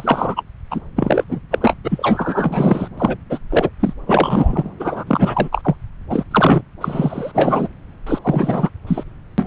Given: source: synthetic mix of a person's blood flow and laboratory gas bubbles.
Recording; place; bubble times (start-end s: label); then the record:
Doppler ultrasound of blood flow; subclavian vein
0.00-0.43 s: bubbles
0.70-0.80 s: bubbles
0.96-1.24 s: bubbles
1.28-1.40 s: bubbles
1.51-1.74 s: bubbles
1.83-2.88 s: bubbles
2.98-3.18 s: bubbles
3.29-3.38 s: bubbles
3.50-3.69 s: bubbles
3.79-3.93 s: bubbles
4.07-4.70 s: bubbles
4.79-5.04 s: bubbles
5.07-5.49 s: bubbles
5.51-5.75 s: bubbles
6.09-6.24 s: bubbles
6.31-6.62 s: bubbles
6.80-7.69 s: bubbles
8.06-8.19 s: bubbles
8.22-8.70 s: bubbles
8.87-9.04 s: bubbles
9.38-9.47 s: bubbles
From the record:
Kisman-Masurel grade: 343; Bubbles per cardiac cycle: rolling drumbeat, 9 or more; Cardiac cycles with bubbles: 100%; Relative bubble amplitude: loud (0.450 to 0.775); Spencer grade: 3 (all of the cardiac periods contain showers or single bubble signals, but not dominating or overriding the cardiac motion signals); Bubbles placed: anywhere in the cardiac cycle